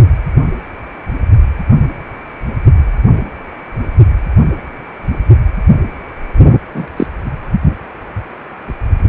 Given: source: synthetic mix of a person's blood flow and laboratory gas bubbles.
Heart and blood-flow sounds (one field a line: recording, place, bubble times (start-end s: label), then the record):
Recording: Doppler ultrasound of blood flow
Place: precordium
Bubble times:
6.75-6.87 s: bubbles
6.96-7.07 s: bubbles
From the record:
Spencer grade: 1 (occasional bubble signal discernible with the cardiac motion signal, with majority of cardiac periods free of bubbles)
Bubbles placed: only in the low amplitude regions of the cardiac cycle